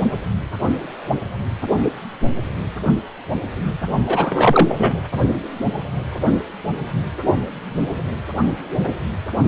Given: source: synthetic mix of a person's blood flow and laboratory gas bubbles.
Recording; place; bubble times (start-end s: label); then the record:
Doppler ultrasound of blood flow; precordium
4.06-4.95 s: bubbles
From the record:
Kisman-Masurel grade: 223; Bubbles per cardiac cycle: several, 3 to 8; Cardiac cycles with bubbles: 10 to 50%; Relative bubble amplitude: loud (0.450 to 0.775); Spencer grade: 2 (many but less than half of the cardiac periods contain bubble signals, singularly or in groups); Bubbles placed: only in the low amplitude regions of the cardiac cycle